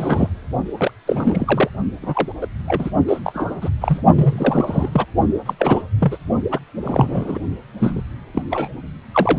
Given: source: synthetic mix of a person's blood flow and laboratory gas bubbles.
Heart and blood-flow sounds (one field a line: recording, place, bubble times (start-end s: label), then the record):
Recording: Doppler ultrasound of blood flow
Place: precordium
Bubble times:
0.00-0.29 s: bubbles
0.77-0.91 s: bubbles
1.07-1.69 s: bubbles
2.02-2.32 s: bubbles
2.41-2.47 s: bubbles
2.68-2.91 s: bubbles
3.08-3.20 s: bubbles
3.24-3.52 s: bubbles
3.61-3.70 s: bubbles
3.81-4.02 s: bubbles
4.15-5.05 s: bubbles
5.46-5.54 s: bubbles
5.58-5.83 s: bubbles
6.00-6.17 s: bubbles
6.51-6.59 s: bubbles
6.83-7.38 s: bubbles
7.79-8.03 s: bubbles
8.34-8.42 s: bubbles
8.50-8.69 s: bubbles
9.14-9.39 s: bubbles
From the record:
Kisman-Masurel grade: 242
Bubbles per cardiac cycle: several, 3 to 8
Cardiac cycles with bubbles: 100%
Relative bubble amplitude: moderate (0.250 to 0.450)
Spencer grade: 3 (all of the cardiac periods contain showers or single bubble signals, but not dominating or overriding the cardiac motion signals)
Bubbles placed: only in the low amplitude regions of the cardiac cycle